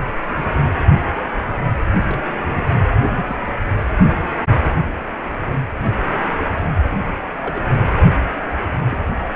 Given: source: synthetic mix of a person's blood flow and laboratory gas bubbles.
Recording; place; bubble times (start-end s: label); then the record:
Doppler ultrasound of blood flow; precordium
1.46-1.54 s: bubbles
2.02-2.21 s: bubbles
3.17-3.25 s: bubbles
3.27-3.35 s: bubbles
7.42-7.67 s: bubbles
8.91-8.97 s: bubbles
From the record:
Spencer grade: 2 (many but less than half of the cardiac periods contain bubble signals, singularly or in groups); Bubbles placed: anywhere in the cardiac cycle